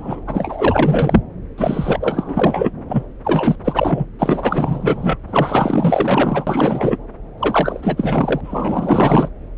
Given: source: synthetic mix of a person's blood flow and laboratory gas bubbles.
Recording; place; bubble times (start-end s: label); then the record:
Doppler ultrasound of blood flow; subclavian vein
0.00-0.20 s: bubbles
0.27-1.21 s: bubbles
1.57-2.71 s: bubbles
2.88-3.03 s: bubbles
3.23-3.56 s: bubbles
3.65-4.05 s: bubbles
4.19-5.18 s: bubbles
5.28-6.98 s: bubbles
7.37-8.41 s: bubbles
8.44-9.29 s: bubbles
From the record:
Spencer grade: 4 (maximum detectable bubble signal sounding continuously throughout systole and diastole of every cardiac period, and overriding the amplitude of the normal cardiac signals); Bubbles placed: anywhere in the cardiac cycle